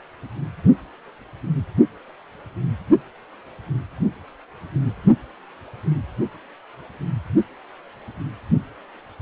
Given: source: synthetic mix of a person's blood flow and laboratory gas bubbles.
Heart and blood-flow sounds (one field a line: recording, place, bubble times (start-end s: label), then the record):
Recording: Doppler ultrasound of blood flow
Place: precordium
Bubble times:
no bubbles
From the record:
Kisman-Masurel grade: 000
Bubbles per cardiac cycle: 0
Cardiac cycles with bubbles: 0%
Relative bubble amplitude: no bubbles discernible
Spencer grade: 0 (complete lack of bubble signals)